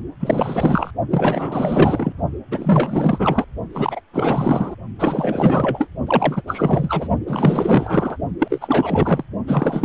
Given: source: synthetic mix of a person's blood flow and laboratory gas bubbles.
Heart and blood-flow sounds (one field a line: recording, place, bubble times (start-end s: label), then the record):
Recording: Doppler ultrasound of blood flow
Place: precordium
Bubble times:
0.20-0.91 s: bubbles
1.10-2.12 s: bubbles
2.51-3.44 s: bubbles
3.73-4.01 s: bubbles
4.12-4.76 s: bubbles
4.99-5.89 s: bubbles
6.07-6.42 s: bubbles
6.47-7.08 s: bubbles
7.27-8.17 s: bubbles
8.38-9.24 s: bubbles
9.47-9.85 s: bubbles
From the record:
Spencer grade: 4 (maximum detectable bubble signal sounding continuously throughout systole and diastole of every cardiac period, and overriding the amplitude of the normal cardiac signals)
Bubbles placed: only in the low amplitude regions of the cardiac cycle